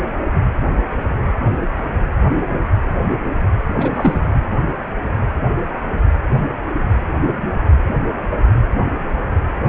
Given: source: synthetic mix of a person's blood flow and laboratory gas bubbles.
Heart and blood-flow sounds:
Doppler ultrasound of blood flow; precordium
3.76-4.21 s: bubbles
From the record:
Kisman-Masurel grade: 213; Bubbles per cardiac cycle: several, 3 to 8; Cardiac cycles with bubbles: 1 to 10%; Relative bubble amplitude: loud (0.450 to 0.775); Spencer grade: 1 (occasional bubble signal discernible with the cardiac motion signal, with majority of cardiac periods free of bubbles); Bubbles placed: anywhere in the cardiac cycle

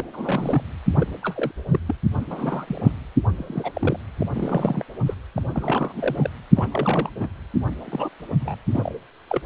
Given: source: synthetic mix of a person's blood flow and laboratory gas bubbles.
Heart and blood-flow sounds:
Doppler ultrasound of blood flow; precordium
0.00-0.05 s: bubbles
0.12-0.64 s: bubbles
0.95-1.06 s: bubbles
1.23-1.52 s: bubbles
1.71-1.79 s: bubbles
1.86-1.95 s: bubbles
2.29-2.92 s: bubbles
3.37-4.00 s: bubbles
4.21-4.26 s: bubbles
4.33-4.84 s: bubbles
5.06-5.14 s: bubbles
5.35-5.42 s: bubbles
5.54-6.30 s: bubbles
6.55-6.67 s: bubbles
6.71-7.09 s: bubbles
7.16-7.29 s: bubbles
7.84-8.09 s: bubbles
8.40-8.56 s: bubbles
8.66-8.96 s: bubbles
9.28-9.42 s: bubbles
From the record:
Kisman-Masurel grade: 242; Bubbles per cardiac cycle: several, 3 to 8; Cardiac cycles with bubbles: 100%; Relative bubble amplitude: moderate (0.250 to 0.450); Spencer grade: 3 (all of the cardiac periods contain showers or single bubble signals, but not dominating or overriding the cardiac motion signals); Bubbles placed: anywhere in the cardiac cycle

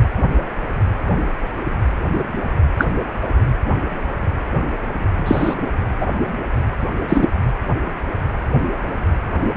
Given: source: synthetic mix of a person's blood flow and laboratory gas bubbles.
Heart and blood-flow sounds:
Doppler ultrasound of blood flow; precordium
2.78-2.86 s: bubbles
5.25-5.54 s: bubbles
6.01-6.07 s: bubbles
7.08-7.27 s: bubbles
From the record:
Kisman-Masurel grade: 123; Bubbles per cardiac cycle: 1 to 2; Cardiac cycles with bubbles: 10 to 50%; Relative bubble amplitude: loud (0.450 to 0.775); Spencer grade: 2 (many but less than half of the cardiac periods contain bubble signals, singularly or in groups); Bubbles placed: anywhere in the cardiac cycle

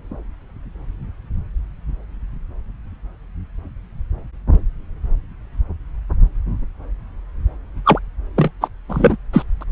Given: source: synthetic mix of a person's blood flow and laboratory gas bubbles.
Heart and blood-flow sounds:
Doppler ultrasound of blood flow; subclavian vein
7.84-7.99 s: bubbles
8.36-8.51 s: bubbles
8.61-8.68 s: bubbles
8.88-9.17 s: bubbles
9.33-9.44 s: bubbles
9.61-9.64 s: bubbles
From the record:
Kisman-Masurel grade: 223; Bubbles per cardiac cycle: several, 3 to 8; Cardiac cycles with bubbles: 10 to 50%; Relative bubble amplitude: loud (0.450 to 0.775); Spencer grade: 2 (many but less than half of the cardiac periods contain bubble signals, singularly or in groups); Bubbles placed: anywhere in the cardiac cycle

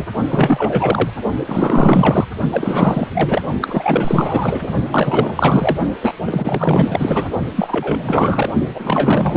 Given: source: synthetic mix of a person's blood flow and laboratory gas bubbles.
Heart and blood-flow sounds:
Doppler ultrasound of blood flow; precordium
0.00-0.05 s: bubbles
0.30-1.10 s: bubbles
1.46-2.25 s: bubbles
2.51-3.08 s: bubbles
3.13-3.42 s: bubbles
3.61-4.68 s: bubbles
4.92-5.77 s: bubbles
6.01-6.12 s: bubbles
6.25-7.28 s: bubbles
7.56-8.50 s: bubbles
8.75-9.37 s: bubbles
From the record:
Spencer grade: 4 (maximum detectable bubble signal sounding continuously throughout systole and diastole of every cardiac period, and overriding the amplitude of the normal cardiac signals); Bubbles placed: only in the low amplitude regions of the cardiac cycle

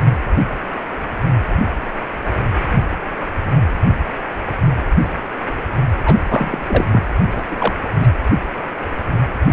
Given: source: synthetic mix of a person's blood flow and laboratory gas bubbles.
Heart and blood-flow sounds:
Doppler ultrasound of blood flow; precordium
6.04-6.20 s: bubbles
6.29-6.58 s: bubbles
6.67-6.88 s: bubbles
6.92-7.04 s: bubbles
7.30-7.47 s: bubbles
7.50-7.56 s: bubbles
7.58-7.74 s: bubbles
7.84-7.89 s: bubbles
8.00-8.09 s: bubbles
From the record:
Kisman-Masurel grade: 223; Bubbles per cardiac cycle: several, 3 to 8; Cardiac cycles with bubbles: 10 to 50%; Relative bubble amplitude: loud (0.450 to 0.775); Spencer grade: 2 (many but less than half of the cardiac periods contain bubble signals, singularly or in groups); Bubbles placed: anywhere in the cardiac cycle

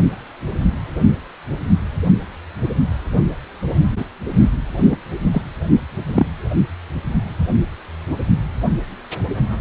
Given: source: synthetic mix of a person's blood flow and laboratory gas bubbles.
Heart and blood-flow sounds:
Doppler ultrasound of blood flow; precordium
4.90-4.96 s: bubbles
5.31-5.42 s: bubbles
6.15-6.26 s: bubbles
From the record:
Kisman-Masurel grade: 123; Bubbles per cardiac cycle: 1 to 2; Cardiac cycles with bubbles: 10 to 50%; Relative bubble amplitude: loud (0.450 to 0.775); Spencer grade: 2 (many but less than half of the cardiac periods contain bubble signals, singularly or in groups); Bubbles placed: only in the low amplitude regions of the cardiac cycle

